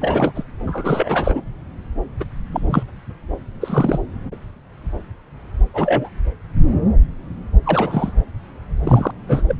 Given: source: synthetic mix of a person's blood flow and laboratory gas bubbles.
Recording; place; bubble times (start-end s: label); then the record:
Doppler ultrasound of blood flow; subclavian vein
0.00-0.32 s: bubbles
0.35-0.43 s: bubbles
0.67-1.41 s: bubbles
2.20-2.24 s: bubbles
2.52-2.83 s: bubbles
3.60-3.99 s: bubbles
5.74-6.09 s: bubbles
7.63-8.12 s: bubbles
8.84-9.11 s: bubbles
9.27-9.44 s: bubbles
9.49-9.56 s: bubbles
From the record:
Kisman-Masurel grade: 232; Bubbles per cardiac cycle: several, 3 to 8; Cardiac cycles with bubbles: 50 to 99%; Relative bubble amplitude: moderate (0.250 to 0.450); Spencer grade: 3 (all of the cardiac periods contain showers or single bubble signals, but not dominating or overriding the cardiac motion signals); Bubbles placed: anywhere in the cardiac cycle